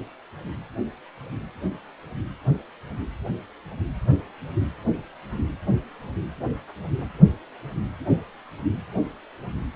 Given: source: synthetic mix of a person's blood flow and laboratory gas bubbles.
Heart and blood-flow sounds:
Doppler ultrasound of blood flow; precordium
no bubbles
From the record:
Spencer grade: 0 (complete lack of bubble signals)

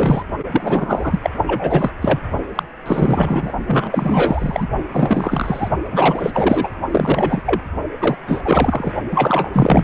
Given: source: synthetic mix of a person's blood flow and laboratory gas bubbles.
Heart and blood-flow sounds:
Doppler ultrasound of blood flow; precordium
0.00-0.23 s: bubbles
0.51-1.19 s: bubbles
1.22-1.30 s: bubbles
1.47-1.91 s: bubbles
2.02-2.20 s: bubbles
2.55-2.63 s: bubbles
2.85-3.52 s: bubbles
3.68-4.67 s: bubbles
4.91-5.69 s: bubbles
5.92-6.68 s: bubbles
6.91-7.42 s: bubbles
7.46-7.61 s: bubbles
8.00-8.16 s: bubbles
8.27-8.93 s: bubbles
9.12-9.51 s: bubbles
9.53-9.84 s: bubbles
From the record:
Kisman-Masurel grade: 343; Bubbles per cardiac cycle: rolling drumbeat, 9 or more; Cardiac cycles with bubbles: 100%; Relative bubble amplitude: loud (0.450 to 0.775); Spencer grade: 3 (all of the cardiac periods contain showers or single bubble signals, but not dominating or overriding the cardiac motion signals); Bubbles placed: only in the low amplitude regions of the cardiac cycle

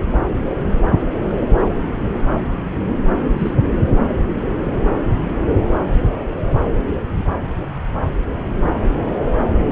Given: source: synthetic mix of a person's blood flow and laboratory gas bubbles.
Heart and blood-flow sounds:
Doppler ultrasound of blood flow; subclavian vein
3.37-3.54 s: bubbles
From the record:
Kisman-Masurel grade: 112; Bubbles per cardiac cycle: 1 to 2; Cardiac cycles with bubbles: 1 to 10%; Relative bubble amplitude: moderate (0.250 to 0.450); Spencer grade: 1 (occasional bubble signal discernible with the cardiac motion signal, with majority of cardiac periods free of bubbles); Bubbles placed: anywhere in the cardiac cycle

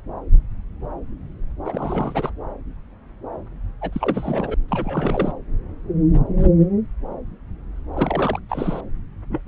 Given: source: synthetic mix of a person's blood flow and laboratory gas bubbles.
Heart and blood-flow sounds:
Doppler ultrasound of blood flow; subclavian vein
1.65-2.31 s: bubbles
3.81-4.54 s: bubbles
4.69-5.33 s: bubbles
7.94-8.39 s: bubbles
8.49-8.80 s: bubbles
9.29-9.40 s: bubbles
From the record:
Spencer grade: 3 (all of the cardiac periods contain showers or single bubble signals, but not dominating or overriding the cardiac motion signals); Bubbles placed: anywhere in the cardiac cycle

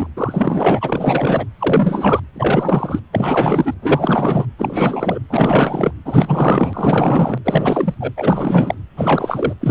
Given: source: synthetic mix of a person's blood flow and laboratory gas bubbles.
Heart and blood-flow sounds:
Doppler ultrasound of blood flow; precordium
0.00-0.07 s: bubbles
0.16-1.45 s: bubbles
1.58-2.20 s: bubbles
2.35-3.00 s: bubbles
3.12-3.75 s: bubbles
3.82-4.46 s: bubbles
4.58-5.19 s: bubbles
5.28-5.91 s: bubbles
6.05-7.38 s: bubbles
7.44-7.94 s: bubbles
8.00-8.13 s: bubbles
8.16-8.74 s: bubbles
8.96-9.54 s: bubbles
9.60-9.71 s: bubbles
From the record:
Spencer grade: 4 (maximum detectable bubble signal sounding continuously throughout systole and diastole of every cardiac period, and overriding the amplitude of the normal cardiac signals); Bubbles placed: anywhere in the cardiac cycle

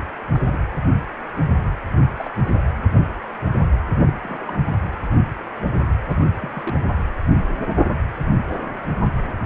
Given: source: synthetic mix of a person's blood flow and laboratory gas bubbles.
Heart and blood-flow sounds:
Doppler ultrasound of blood flow; precordium
0.34-0.66 s: bubbles
2.17-2.33 s: bubbles
2.45-2.62 s: bubbles
3.93-4.20 s: bubbles
4.23-4.61 s: bubbles
6.08-6.20 s: bubbles
6.40-6.79 s: bubbles
From the record:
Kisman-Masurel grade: 221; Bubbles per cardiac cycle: several, 3 to 8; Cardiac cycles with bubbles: 10 to 50%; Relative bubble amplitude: barely perceptible (0.100 to 0.250); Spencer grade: 2 (many but less than half of the cardiac periods contain bubble signals, singularly or in groups); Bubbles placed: anywhere in the cardiac cycle

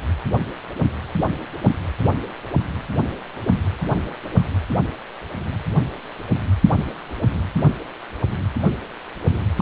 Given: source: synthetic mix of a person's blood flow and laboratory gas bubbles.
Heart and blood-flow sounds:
Doppler ultrasound of blood flow; precordium
9.56-9.62 s: bubbles
From the record:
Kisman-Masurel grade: 213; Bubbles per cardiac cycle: several, 3 to 8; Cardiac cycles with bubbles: 1 to 10%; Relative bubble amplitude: loud (0.450 to 0.775); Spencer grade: 1 (occasional bubble signal discernible with the cardiac motion signal, with majority of cardiac periods free of bubbles); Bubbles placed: anywhere in the cardiac cycle

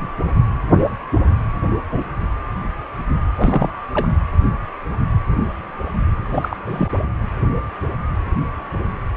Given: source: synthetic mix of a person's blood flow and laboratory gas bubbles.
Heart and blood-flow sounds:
Doppler ultrasound of blood flow; precordium
3.35-3.69 s: bubbles
3.93-4.08 s: bubbles
6.30-6.57 s: bubbles
6.65-6.92 s: bubbles
From the record:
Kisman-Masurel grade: 222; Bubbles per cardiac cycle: several, 3 to 8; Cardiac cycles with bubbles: 10 to 50%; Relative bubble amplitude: moderate (0.250 to 0.450); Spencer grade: 2 (many but less than half of the cardiac periods contain bubble signals, singularly or in groups); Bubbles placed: anywhere in the cardiac cycle

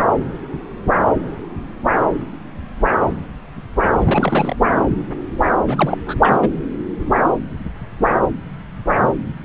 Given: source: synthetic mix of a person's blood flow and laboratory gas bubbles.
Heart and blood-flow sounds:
Doppler ultrasound of blood flow; subclavian vein
3.94-4.56 s: bubbles
5.67-5.98 s: bubbles
6.06-6.15 s: bubbles
6.21-6.39 s: bubbles
6.42-6.48 s: bubbles
From the record:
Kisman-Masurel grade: 222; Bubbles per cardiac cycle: several, 3 to 8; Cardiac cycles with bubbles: 10 to 50%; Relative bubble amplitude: moderate (0.250 to 0.450); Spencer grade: 2 (many but less than half of the cardiac periods contain bubble signals, singularly or in groups); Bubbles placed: anywhere in the cardiac cycle

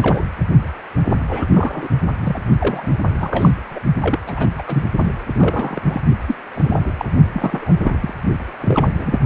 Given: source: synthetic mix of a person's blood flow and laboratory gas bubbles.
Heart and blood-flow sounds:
Doppler ultrasound of blood flow; precordium
0.00-0.23 s: bubbles
1.09-1.16 s: bubbles
1.27-1.47 s: bubbles
1.53-1.89 s: bubbles
2.21-2.39 s: bubbles
2.58-2.97 s: bubbles
3.20-3.51 s: bubbles
3.71-3.79 s: bubbles
4.00-4.19 s: bubbles
4.27-4.47 s: bubbles
4.58-4.62 s: bubbles
4.67-4.85 s: bubbles
4.97-5.12 s: bubbles
5.35-5.80 s: bubbles
5.89-6.01 s: bubbles
6.25-6.35 s: bubbles
6.55-6.80 s: bubbles
6.84-6.94 s: bubbles
6.98-7.05 s: bubbles
7.33-8.13 s: bubbles
8.61-9.19 s: bubbles
From the record:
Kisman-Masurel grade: 242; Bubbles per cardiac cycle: several, 3 to 8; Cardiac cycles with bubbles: 100%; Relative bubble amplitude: moderate (0.250 to 0.450); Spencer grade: 3 (all of the cardiac periods contain showers or single bubble signals, but not dominating or overriding the cardiac motion signals); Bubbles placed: only in the low amplitude regions of the cardiac cycle

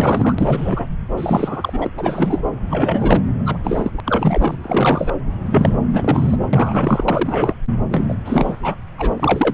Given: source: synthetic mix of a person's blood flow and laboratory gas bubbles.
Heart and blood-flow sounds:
Doppler ultrasound of blood flow; subclavian vein
0.00-0.35 s: bubbles
0.38-0.88 s: bubbles
1.17-1.87 s: bubbles
1.97-2.44 s: bubbles
2.71-3.22 s: bubbles
3.46-3.58 s: bubbles
3.63-3.92 s: bubbles
3.97-4.00 s: bubbles
4.05-4.56 s: bubbles
4.62-5.13 s: bubbles
5.46-5.77 s: bubbles
5.93-6.37 s: bubbles
6.53-7.04 s: bubbles
7.08-7.54 s: bubbles
7.90-8.04 s: bubbles
8.08-8.14 s: bubbles
8.24-8.60 s: bubbles
8.62-8.75 s: bubbles
8.97-9.12 s: bubbles
9.20-9.53 s: bubbles
From the record:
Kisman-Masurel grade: 343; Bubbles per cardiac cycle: rolling drumbeat, 9 or more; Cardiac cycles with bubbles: 100%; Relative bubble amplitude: loud (0.450 to 0.775); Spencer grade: 3 (all of the cardiac periods contain showers or single bubble signals, but not dominating or overriding the cardiac motion signals); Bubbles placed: anywhere in the cardiac cycle

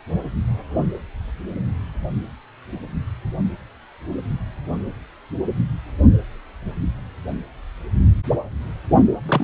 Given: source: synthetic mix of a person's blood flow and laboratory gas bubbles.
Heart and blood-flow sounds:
Doppler ultrasound of blood flow; precordium
9.26-9.44 s: bubbles
From the record:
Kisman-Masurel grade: 112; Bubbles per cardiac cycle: 1 to 2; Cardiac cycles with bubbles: 1 to 10%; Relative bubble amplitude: moderate (0.250 to 0.450); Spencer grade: 1 (occasional bubble signal discernible with the cardiac motion signal, with majority of cardiac periods free of bubbles); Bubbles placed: only in the low amplitude regions of the cardiac cycle

